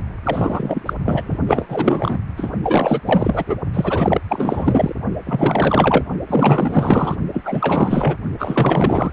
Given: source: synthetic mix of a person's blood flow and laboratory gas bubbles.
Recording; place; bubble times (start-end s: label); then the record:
Doppler ultrasound of blood flow; precordium
0.24-0.82 s: bubbles
0.85-0.94 s: bubbles
1.05-1.38 s: bubbles
1.47-2.19 s: bubbles
2.36-2.51 s: bubbles
2.62-3.00 s: bubbles
3.05-3.44 s: bubbles
3.48-3.55 s: bubbles
3.73-4.21 s: bubbles
4.29-4.94 s: bubbles
5.26-6.04 s: bubbles
6.27-7.16 s: bubbles
7.33-8.16 s: bubbles
8.38-9.12 s: bubbles
From the record:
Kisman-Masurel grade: 444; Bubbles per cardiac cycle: continuous sound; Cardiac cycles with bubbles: 100%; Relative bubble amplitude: maximal (0.775 to 0.999); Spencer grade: 4 (maximum detectable bubble signal sounding continuously throughout systole and diastole of every cardiac period, and overriding the amplitude of the normal cardiac signals); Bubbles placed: only in the low amplitude regions of the cardiac cycle